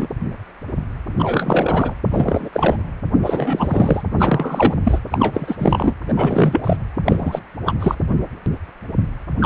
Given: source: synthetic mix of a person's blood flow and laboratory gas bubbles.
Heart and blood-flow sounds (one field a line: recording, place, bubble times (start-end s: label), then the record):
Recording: Doppler ultrasound of blood flow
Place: precordium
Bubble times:
0.00-0.07 s: bubbles
1.19-1.93 s: bubbles
2.11-2.49 s: bubbles
2.52-2.76 s: bubbles
3.22-4.02 s: bubbles
4.18-4.74 s: bubbles
4.84-5.00 s: bubbles
5.10-5.94 s: bubbles
6.08-6.13 s: bubbles
6.16-6.61 s: bubbles
6.63-6.76 s: bubbles
7.05-7.42 s: bubbles
7.66-7.73 s: bubbles
7.79-7.95 s: bubbles
9.38-9.46 s: bubbles
From the record:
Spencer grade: 3 (all of the cardiac periods contain showers or single bubble signals, but not dominating or overriding the cardiac motion signals)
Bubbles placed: anywhere in the cardiac cycle